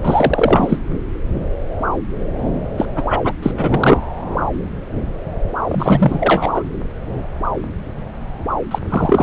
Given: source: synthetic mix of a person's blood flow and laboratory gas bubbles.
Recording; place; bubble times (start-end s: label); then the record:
Doppler ultrasound of blood flow; subclavian vein
0.02-0.80 s: bubbles
2.77-2.86 s: bubbles
2.96-3.21 s: bubbles
3.24-3.33 s: bubbles
3.42-4.00 s: bubbles
5.67-6.62 s: bubbles
8.71-8.79 s: bubbles
8.90-9.23 s: bubbles
From the record:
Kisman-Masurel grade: 333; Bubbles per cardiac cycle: rolling drumbeat, 9 or more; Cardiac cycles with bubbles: 50 to 99%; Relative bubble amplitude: loud (0.450 to 0.775); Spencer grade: 3 (all of the cardiac periods contain showers or single bubble signals, but not dominating or overriding the cardiac motion signals); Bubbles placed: anywhere in the cardiac cycle